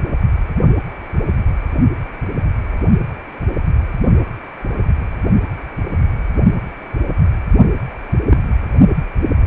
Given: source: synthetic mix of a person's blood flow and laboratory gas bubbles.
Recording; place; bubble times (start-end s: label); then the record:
Doppler ultrasound of blood flow; precordium
8.29-8.37 s: bubbles
From the record:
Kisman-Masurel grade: 112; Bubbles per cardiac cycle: 1 to 2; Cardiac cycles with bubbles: 1 to 10%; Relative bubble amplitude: moderate (0.250 to 0.450); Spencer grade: 1 (occasional bubble signal discernible with the cardiac motion signal, with majority of cardiac periods free of bubbles); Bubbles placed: only in the low amplitude regions of the cardiac cycle